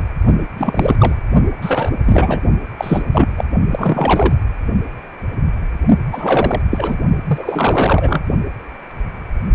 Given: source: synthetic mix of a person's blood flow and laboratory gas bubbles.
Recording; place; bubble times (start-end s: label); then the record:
Doppler ultrasound of blood flow; precordium
0.57-0.96 s: bubbles
0.99-1.15 s: bubbles
1.62-1.90 s: bubbles
2.05-2.40 s: bubbles
2.77-3.03 s: bubbles
3.12-3.44 s: bubbles
3.71-4.35 s: bubbles
6.12-6.61 s: bubbles
6.71-6.98 s: bubbles
7.27-8.21 s: bubbles
From the record:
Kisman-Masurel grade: 333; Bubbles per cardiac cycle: rolling drumbeat, 9 or more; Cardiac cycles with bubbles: 50 to 99%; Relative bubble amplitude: loud (0.450 to 0.775); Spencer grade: 3 (all of the cardiac periods contain showers or single bubble signals, but not dominating or overriding the cardiac motion signals); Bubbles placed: only in the low amplitude regions of the cardiac cycle